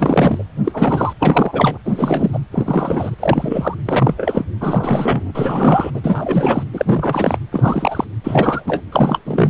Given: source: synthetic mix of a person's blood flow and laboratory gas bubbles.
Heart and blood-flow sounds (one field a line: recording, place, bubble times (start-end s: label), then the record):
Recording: Doppler ultrasound of blood flow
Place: precordium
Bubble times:
0.00-0.44 s: bubbles
0.64-1.13 s: bubbles
1.20-1.77 s: bubbles
1.85-2.39 s: bubbles
2.52-3.15 s: bubbles
3.19-3.74 s: bubbles
3.85-4.45 s: bubbles
4.61-5.32 s: bubbles
5.34-5.91 s: bubbles
5.94-6.00 s: bubbles
6.04-6.64 s: bubbles
6.73-7.39 s: bubbles
7.52-8.04 s: bubbles
8.23-8.63 s: bubbles
8.66-8.81 s: bubbles
8.91-9.19 s: bubbles
9.25-9.50 s: bubbles
From the record:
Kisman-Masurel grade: 333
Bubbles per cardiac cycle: rolling drumbeat, 9 or more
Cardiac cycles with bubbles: 50 to 99%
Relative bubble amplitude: loud (0.450 to 0.775)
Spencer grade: 3 (all of the cardiac periods contain showers or single bubble signals, but not dominating or overriding the cardiac motion signals)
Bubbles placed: anywhere in the cardiac cycle